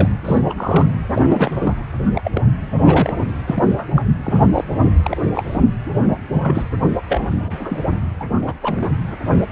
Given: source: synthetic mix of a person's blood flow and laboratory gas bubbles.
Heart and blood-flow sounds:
Doppler ultrasound of blood flow; precordium
0.00-0.12 s: bubbles
0.24-0.42 s: bubbles
0.46-0.53 s: bubbles
0.57-0.87 s: bubbles
1.14-1.51 s: bubbles
1.55-1.85 s: bubbles
2.13-2.21 s: bubbles
2.24-2.41 s: bubbles
2.78-3.31 s: bubbles
3.46-3.64 s: bubbles
3.70-3.87 s: bubbles
3.95-4.02 s: bubbles
4.23-4.48 s: bubbles
4.54-4.64 s: bubbles
4.70-4.92 s: bubbles
5.03-5.17 s: bubbles
5.22-5.30 s: bubbles
5.34-5.62 s: bubbles
5.85-5.91 s: bubbles
5.96-6.21 s: bubbles
6.24-6.63 s: bubbles
7.08-7.21 s: bubbles
7.25-7.79 s: bubbles
8.20-8.24 s: bubbles
8.46-8.54 s: bubbles
8.62-8.90 s: bubbles
From the record:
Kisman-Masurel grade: 242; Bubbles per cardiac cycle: several, 3 to 8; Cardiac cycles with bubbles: 100%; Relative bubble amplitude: moderate (0.250 to 0.450); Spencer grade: 3 (all of the cardiac periods contain showers or single bubble signals, but not dominating or overriding the cardiac motion signals); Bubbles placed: anywhere in the cardiac cycle

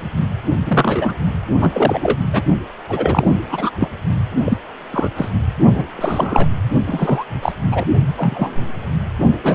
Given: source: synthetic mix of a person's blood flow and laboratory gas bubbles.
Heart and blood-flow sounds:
Doppler ultrasound of blood flow; precordium
0.66-1.13 s: bubbles
1.61-2.18 s: bubbles
2.33-2.43 s: bubbles
2.89-3.36 s: bubbles
3.49-3.70 s: bubbles
3.80-3.88 s: bubbles
4.36-4.57 s: bubbles
4.90-5.10 s: bubbles
5.16-5.28 s: bubbles
5.74-5.85 s: bubbles
5.97-6.47 s: bubbles
6.87-7.24 s: bubbles
7.42-7.52 s: bubbles
7.71-7.84 s: bubbles
8.17-8.71 s: bubbles
9.44-9.55 s: bubbles
From the record:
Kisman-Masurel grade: 243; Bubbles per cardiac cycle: several, 3 to 8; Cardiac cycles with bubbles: 100%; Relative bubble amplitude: loud (0.450 to 0.775); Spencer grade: 3 (all of the cardiac periods contain showers or single bubble signals, but not dominating or overriding the cardiac motion signals); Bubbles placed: only in the low amplitude regions of the cardiac cycle

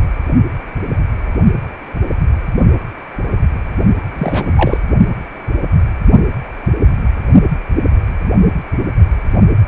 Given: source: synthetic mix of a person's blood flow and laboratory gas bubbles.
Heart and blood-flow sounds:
Doppler ultrasound of blood flow; precordium
4.13-4.80 s: bubbles
From the record:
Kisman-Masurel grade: 213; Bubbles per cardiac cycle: several, 3 to 8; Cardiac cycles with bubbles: 1 to 10%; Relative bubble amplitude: loud (0.450 to 0.775); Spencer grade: 1 (occasional bubble signal discernible with the cardiac motion signal, with majority of cardiac periods free of bubbles); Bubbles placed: only in the low amplitude regions of the cardiac cycle

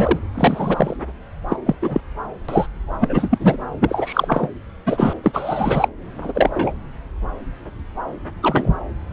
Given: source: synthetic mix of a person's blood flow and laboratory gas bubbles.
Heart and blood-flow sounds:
Doppler ultrasound of blood flow; subclavian vein
0.00-0.19 s: bubbles
0.35-0.97 s: bubbles
1.49-1.56 s: bubbles
1.66-1.75 s: bubbles
1.82-2.00 s: bubbles
2.48-2.67 s: bubbles
3.00-3.58 s: bubbles
3.80-4.50 s: bubbles
4.86-5.14 s: bubbles
5.24-5.88 s: bubbles
6.21-6.74 s: bubbles
8.42-8.70 s: bubbles
9.10-9.13 s: bubbles
From the record:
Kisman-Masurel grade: 233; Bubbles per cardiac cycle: several, 3 to 8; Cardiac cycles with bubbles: 50 to 99%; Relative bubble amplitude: loud (0.450 to 0.775); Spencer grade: 3 (all of the cardiac periods contain showers or single bubble signals, but not dominating or overriding the cardiac motion signals); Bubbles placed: anywhere in the cardiac cycle

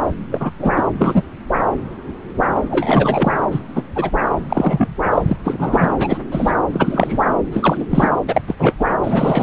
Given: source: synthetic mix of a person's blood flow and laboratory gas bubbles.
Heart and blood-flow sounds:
Doppler ultrasound of blood flow; subclavian vein
0.31-0.51 s: bubbles
0.58-0.71 s: bubbles
0.75-0.83 s: bubbles
0.99-1.22 s: bubbles
2.70-3.32 s: bubbles
3.51-3.60 s: bubbles
3.75-3.82 s: bubbles
3.95-4.10 s: bubbles
4.49-4.94 s: bubbles
5.10-5.22 s: bubbles
5.27-5.36 s: bubbles
5.43-5.89 s: bubbles
5.98-6.18 s: bubbles
6.31-6.52 s: bubbles
6.72-7.24 s: bubbles
7.52-7.85 s: bubbles
7.90-8.09 s: bubbles
8.28-8.42 s: bubbles
8.47-8.55 s: bubbles
8.59-8.76 s: bubbles
8.79-8.85 s: bubbles
9.04-9.43 s: bubbles
From the record:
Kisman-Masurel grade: 233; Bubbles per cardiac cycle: several, 3 to 8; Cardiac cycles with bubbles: 50 to 99%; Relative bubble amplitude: loud (0.450 to 0.775); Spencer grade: 3 (all of the cardiac periods contain showers or single bubble signals, but not dominating or overriding the cardiac motion signals); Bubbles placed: anywhere in the cardiac cycle

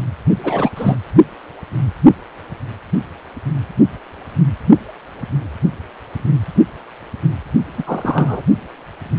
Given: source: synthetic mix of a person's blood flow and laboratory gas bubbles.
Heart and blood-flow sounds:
Doppler ultrasound of blood flow; precordium
0.44-0.69 s: bubbles
0.76-0.95 s: bubbles
7.77-7.83 s: bubbles
7.86-8.43 s: bubbles
From the record:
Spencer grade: 2 (many but less than half of the cardiac periods contain bubble signals, singularly or in groups); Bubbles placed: only in the low amplitude regions of the cardiac cycle

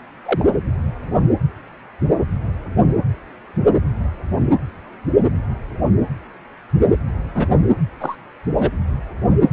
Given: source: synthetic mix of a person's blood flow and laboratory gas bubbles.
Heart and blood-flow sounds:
Doppler ultrasound of blood flow; precordium
0.25-0.45 s: bubbles
7.34-7.46 s: bubbles
8.00-8.15 s: bubbles
8.53-8.71 s: bubbles
From the record:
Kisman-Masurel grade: 122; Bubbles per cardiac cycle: 1 to 2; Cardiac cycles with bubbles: 10 to 50%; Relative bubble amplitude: moderate (0.250 to 0.450); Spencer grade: 2 (many but less than half of the cardiac periods contain bubble signals, singularly or in groups); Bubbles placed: anywhere in the cardiac cycle

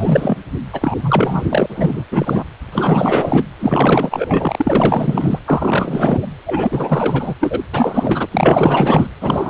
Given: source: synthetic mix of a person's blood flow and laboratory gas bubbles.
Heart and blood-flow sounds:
Doppler ultrasound of blood flow; precordium
0.00-0.36 s: bubbles
0.73-1.66 s: bubbles
1.69-2.03 s: bubbles
2.11-2.44 s: bubbles
2.72-3.43 s: bubbles
3.59-5.39 s: bubbles
5.46-6.26 s: bubbles
6.46-7.35 s: bubbles
7.40-7.59 s: bubbles
7.73-8.27 s: bubbles
8.32-9.07 s: bubbles
9.21-9.50 s: bubbles
From the record:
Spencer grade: 4 (maximum detectable bubble signal sounding continuously throughout systole and diastole of every cardiac period, and overriding the amplitude of the normal cardiac signals); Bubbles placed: anywhere in the cardiac cycle

